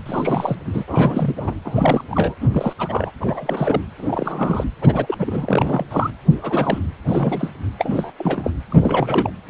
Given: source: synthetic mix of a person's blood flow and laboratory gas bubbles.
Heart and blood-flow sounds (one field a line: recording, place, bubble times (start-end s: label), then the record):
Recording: Doppler ultrasound of blood flow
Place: precordium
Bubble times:
0.05-0.57 s: bubbles
0.65-0.84 s: bubbles
0.87-1.54 s: bubbles
1.64-2.04 s: bubbles
2.10-2.35 s: bubbles
2.41-2.48 s: bubbles
2.52-2.73 s: bubbles
2.79-3.11 s: bubbles
3.21-3.81 s: bubbles
3.98-4.69 s: bubbles
4.81-5.16 s: bubbles
5.19-5.87 s: bubbles
5.89-6.10 s: bubbles
6.30-6.37 s: bubbles
6.42-6.78 s: bubbles
7.07-7.52 s: bubbles
7.79-8.11 s: bubbles
8.19-8.50 s: bubbles
8.60-8.62 s: bubbles
8.70-9.30 s: bubbles
9.48-9.50 s: bubbles
From the record:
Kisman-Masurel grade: 342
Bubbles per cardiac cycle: rolling drumbeat, 9 or more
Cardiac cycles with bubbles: 100%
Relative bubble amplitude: moderate (0.250 to 0.450)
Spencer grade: 3 (all of the cardiac periods contain showers or single bubble signals, but not dominating or overriding the cardiac motion signals)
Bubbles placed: anywhere in the cardiac cycle